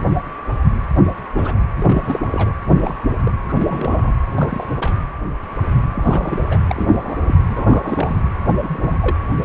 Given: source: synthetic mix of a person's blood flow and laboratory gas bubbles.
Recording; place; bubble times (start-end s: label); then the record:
Doppler ultrasound of blood flow; precordium
1.36-1.54 s: bubbles
1.75-2.54 s: bubbles
2.65-2.94 s: bubbles
3.25-3.31 s: bubbles
3.48-4.13 s: bubbles
4.36-4.77 s: bubbles
4.79-4.95 s: bubbles
5.89-6.42 s: bubbles
6.50-6.58 s: bubbles
6.68-7.41 s: bubbles
7.49-8.16 s: bubbles
8.46-8.98 s: bubbles
9.01-9.15 s: bubbles
9.29-9.44 s: bubbles
From the record:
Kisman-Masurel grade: 232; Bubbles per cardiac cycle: several, 3 to 8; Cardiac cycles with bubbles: 50 to 99%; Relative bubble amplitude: moderate (0.250 to 0.450); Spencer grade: 3 (all of the cardiac periods contain showers or single bubble signals, but not dominating or overriding the cardiac motion signals); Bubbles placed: anywhere in the cardiac cycle